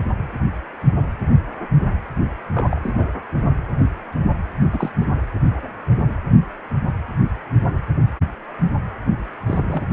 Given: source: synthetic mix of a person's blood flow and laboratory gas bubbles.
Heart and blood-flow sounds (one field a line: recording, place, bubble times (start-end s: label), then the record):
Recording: Doppler ultrasound of blood flow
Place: precordium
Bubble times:
2.54-2.93 s: bubbles
2.97-3.08 s: bubbles
4.73-4.91 s: bubbles
4.96-5.06 s: bubbles
9.46-9.83 s: bubbles
From the record:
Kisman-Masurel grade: 222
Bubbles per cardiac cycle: several, 3 to 8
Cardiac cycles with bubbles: 10 to 50%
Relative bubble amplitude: moderate (0.250 to 0.450)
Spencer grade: 2 (many but less than half of the cardiac periods contain bubble signals, singularly or in groups)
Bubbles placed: only in the low amplitude regions of the cardiac cycle